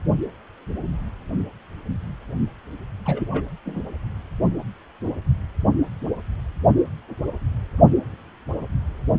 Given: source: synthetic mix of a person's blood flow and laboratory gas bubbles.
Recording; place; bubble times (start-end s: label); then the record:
Doppler ultrasound of blood flow; precordium
3.06-3.56 s: bubbles
3.65-3.81 s: bubbles
From the record:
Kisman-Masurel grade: 221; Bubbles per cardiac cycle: several, 3 to 8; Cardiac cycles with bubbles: 10 to 50%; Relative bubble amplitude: barely perceptible (0.100 to 0.250); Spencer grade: 2 (many but less than half of the cardiac periods contain bubble signals, singularly or in groups); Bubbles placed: only in the low amplitude regions of the cardiac cycle